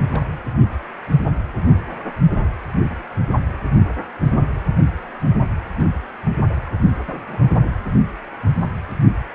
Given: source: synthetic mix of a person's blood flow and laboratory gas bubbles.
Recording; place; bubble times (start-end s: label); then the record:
Doppler ultrasound of blood flow; precordium
0.10-0.27 s: bubbles
0.60-0.66 s: bubbles
1.11-1.17 s: bubbles
5.79-5.84 s: bubbles
6.25-6.29 s: bubbles
7.06-7.51 s: bubbles
From the record:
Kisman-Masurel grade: 121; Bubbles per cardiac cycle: 1 to 2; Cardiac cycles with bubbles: 10 to 50%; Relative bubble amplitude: barely perceptible (0.100 to 0.250); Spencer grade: 2 (many but less than half of the cardiac periods contain bubble signals, singularly or in groups); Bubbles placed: anywhere in the cardiac cycle